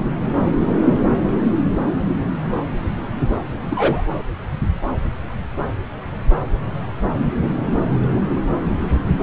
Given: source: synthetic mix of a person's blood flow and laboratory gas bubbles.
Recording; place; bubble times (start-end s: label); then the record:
Doppler ultrasound of blood flow; subclavian vein
3.69-4.03 s: bubbles
From the record:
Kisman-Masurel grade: 122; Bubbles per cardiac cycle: 1 to 2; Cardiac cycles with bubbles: 10 to 50%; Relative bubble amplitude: moderate (0.250 to 0.450); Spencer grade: 2 (many but less than half of the cardiac periods contain bubble signals, singularly or in groups); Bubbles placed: anywhere in the cardiac cycle